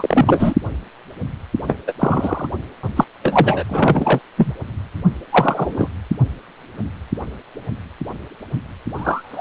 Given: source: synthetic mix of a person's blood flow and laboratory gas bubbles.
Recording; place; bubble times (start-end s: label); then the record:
Doppler ultrasound of blood flow; precordium
0.00-0.54 s: bubbles
1.67-1.78 s: bubbles
1.87-1.93 s: bubbles
1.99-2.47 s: bubbles
2.96-3.06 s: bubbles
3.23-3.64 s: bubbles
3.69-4.19 s: bubbles
4.37-4.52 s: bubbles
5.31-5.88 s: bubbles
8.97-9.41 s: bubbles
From the record:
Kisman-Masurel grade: 233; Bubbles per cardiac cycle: several, 3 to 8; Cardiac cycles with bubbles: 50 to 99%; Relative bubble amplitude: loud (0.450 to 0.775); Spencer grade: 3 (all of the cardiac periods contain showers or single bubble signals, but not dominating or overriding the cardiac motion signals); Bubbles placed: anywhere in the cardiac cycle